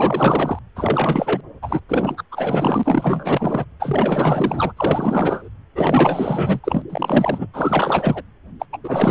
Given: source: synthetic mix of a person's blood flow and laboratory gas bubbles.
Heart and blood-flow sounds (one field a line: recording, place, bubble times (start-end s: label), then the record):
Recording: Doppler ultrasound of blood flow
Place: precordium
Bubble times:
0.00-0.59 s: bubbles
0.76-1.41 s: bubbles
1.62-1.81 s: bubbles
1.89-2.23 s: bubbles
2.31-3.65 s: bubbles
3.79-4.74 s: bubbles
4.76-5.49 s: bubbles
5.75-6.60 s: bubbles
6.63-6.84 s: bubbles
6.90-7.46 s: bubbles
7.54-8.22 s: bubbles
8.59-8.65 s: bubbles
8.72-8.77 s: bubbles
8.83-9.11 s: bubbles
From the record:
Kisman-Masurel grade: 444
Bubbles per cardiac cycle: continuous sound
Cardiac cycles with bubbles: 100%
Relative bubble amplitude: maximal (0.775 to 0.999)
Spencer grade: 4 (maximum detectable bubble signal sounding continuously throughout systole and diastole of every cardiac period, and overriding the amplitude of the normal cardiac signals)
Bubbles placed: anywhere in the cardiac cycle